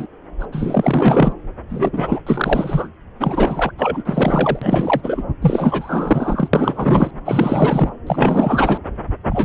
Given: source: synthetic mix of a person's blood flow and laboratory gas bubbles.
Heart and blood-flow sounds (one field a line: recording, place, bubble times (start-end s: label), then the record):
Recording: Doppler ultrasound of blood flow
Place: subclavian vein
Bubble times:
0.00-0.07 s: bubbles
0.40-0.46 s: bubbles
0.52-1.33 s: bubbles
1.69-2.21 s: bubbles
2.27-2.89 s: bubbles
3.19-3.73 s: bubbles
3.77-5.24 s: bubbles
5.42-6.49 s: bubbles
6.53-7.11 s: bubbles
7.25-7.89 s: bubbles
8.06-8.77 s: bubbles
9.29-9.45 s: bubbles
From the record:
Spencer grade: 4 (maximum detectable bubble signal sounding continuously throughout systole and diastole of every cardiac period, and overriding the amplitude of the normal cardiac signals)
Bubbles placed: anywhere in the cardiac cycle